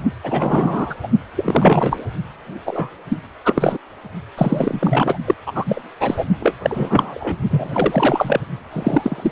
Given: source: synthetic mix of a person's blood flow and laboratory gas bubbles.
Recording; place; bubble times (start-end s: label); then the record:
Doppler ultrasound of blood flow; precordium
0.23-0.95 s: bubbles
1.03-1.07 s: bubbles
1.36-2.04 s: bubbles
2.65-2.90 s: bubbles
3.09-3.20 s: bubbles
3.45-3.78 s: bubbles
4.38-5.17 s: bubbles
5.25-5.34 s: bubbles
5.46-5.52 s: bubbles
5.55-5.81 s: bubbles
6.00-6.25 s: bubbles
6.39-6.54 s: bubbles
6.62-7.37 s: bubbles
7.50-8.40 s: bubbles
8.73-9.32 s: bubbles
From the record:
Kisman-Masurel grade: 333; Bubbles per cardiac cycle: rolling drumbeat, 9 or more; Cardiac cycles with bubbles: 50 to 99%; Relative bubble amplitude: loud (0.450 to 0.775); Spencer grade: 3 (all of the cardiac periods contain showers or single bubble signals, but not dominating or overriding the cardiac motion signals); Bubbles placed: only in the low amplitude regions of the cardiac cycle